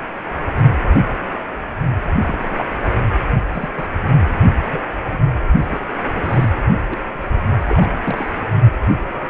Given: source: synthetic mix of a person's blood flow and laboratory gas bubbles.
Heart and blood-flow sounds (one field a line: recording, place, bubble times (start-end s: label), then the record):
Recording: Doppler ultrasound of blood flow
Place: precordium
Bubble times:
2.27-2.38 s: bubbles
2.44-2.55 s: bubbles
2.58-2.65 s: bubbles
3.52-3.70 s: bubbles
3.77-3.87 s: bubbles
4.63-4.85 s: bubbles
5.12-5.19 s: bubbles
5.70-5.80 s: bubbles
6.10-6.48 s: bubbles
6.90-6.97 s: bubbles
7.68-7.95 s: bubbles
8.04-8.43 s: bubbles
From the record:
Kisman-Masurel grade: 222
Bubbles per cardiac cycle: several, 3 to 8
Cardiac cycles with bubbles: 10 to 50%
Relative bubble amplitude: moderate (0.250 to 0.450)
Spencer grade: 2 (many but less than half of the cardiac periods contain bubble signals, singularly or in groups)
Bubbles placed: only in the low amplitude regions of the cardiac cycle